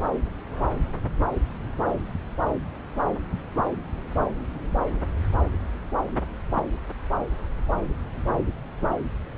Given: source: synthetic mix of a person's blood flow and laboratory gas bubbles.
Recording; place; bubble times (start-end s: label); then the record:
Doppler ultrasound of blood flow; subclavian vein
no bubbles
From the record:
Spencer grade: 0 (complete lack of bubble signals)